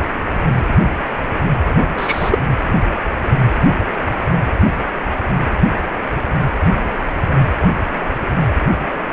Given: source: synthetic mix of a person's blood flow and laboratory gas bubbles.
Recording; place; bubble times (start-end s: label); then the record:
Doppler ultrasound of blood flow; precordium
1.97-2.39 s: bubbles
From the record:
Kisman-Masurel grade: 113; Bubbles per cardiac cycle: 1 to 2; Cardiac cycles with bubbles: 1 to 10%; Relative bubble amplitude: loud (0.450 to 0.775); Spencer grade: 1 (occasional bubble signal discernible with the cardiac motion signal, with majority of cardiac periods free of bubbles); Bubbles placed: anywhere in the cardiac cycle